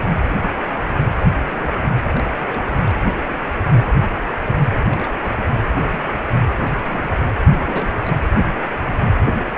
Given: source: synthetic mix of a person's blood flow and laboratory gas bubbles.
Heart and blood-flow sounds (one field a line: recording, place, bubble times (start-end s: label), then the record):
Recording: Doppler ultrasound of blood flow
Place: precordium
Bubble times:
1.28-1.87 s: bubbles
2.11-2.25 s: bubbles
2.35-2.77 s: bubbles
2.87-2.97 s: bubbles
4.78-5.09 s: bubbles
5.22-5.36 s: bubbles
5.46-5.59 s: bubbles
5.72-5.99 s: bubbles
6.18-6.21 s: bubbles
6.63-7.31 s: bubbles
7.51-8.13 s: bubbles
From the record:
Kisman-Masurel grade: 221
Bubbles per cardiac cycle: several, 3 to 8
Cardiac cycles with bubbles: 10 to 50%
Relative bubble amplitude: barely perceptible (0.100 to 0.250)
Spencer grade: 2 (many but less than half of the cardiac periods contain bubble signals, singularly or in groups)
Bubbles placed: anywhere in the cardiac cycle